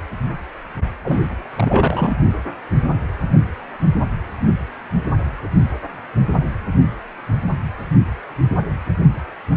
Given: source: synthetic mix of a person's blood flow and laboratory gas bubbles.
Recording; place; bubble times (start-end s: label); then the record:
Doppler ultrasound of blood flow; precordium
1.04-1.18 s: bubbles
1.55-2.15 s: bubbles
From the record:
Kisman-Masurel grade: 213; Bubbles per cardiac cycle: several, 3 to 8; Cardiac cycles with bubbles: 1 to 10%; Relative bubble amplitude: loud (0.450 to 0.775); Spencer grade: 1 (occasional bubble signal discernible with the cardiac motion signal, with majority of cardiac periods free of bubbles); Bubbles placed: only in the low amplitude regions of the cardiac cycle